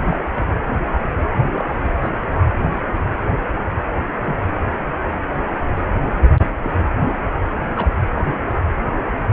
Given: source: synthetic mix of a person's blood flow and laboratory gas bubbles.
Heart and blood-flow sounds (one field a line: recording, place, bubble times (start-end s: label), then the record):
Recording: Doppler ultrasound of blood flow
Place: precordium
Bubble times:
0.11-0.23 s: bubbles
0.34-0.45 s: bubbles
1.46-1.74 s: bubbles
2.02-2.09 s: bubbles
4.24-4.36 s: bubbles
6.37-6.48 s: bubbles
6.62-6.79 s: bubbles
7.01-7.08 s: bubbles
7.76-7.88 s: bubbles
8.15-8.39 s: bubbles
From the record:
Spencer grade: 2 (many but less than half of the cardiac periods contain bubble signals, singularly or in groups)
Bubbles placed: anywhere in the cardiac cycle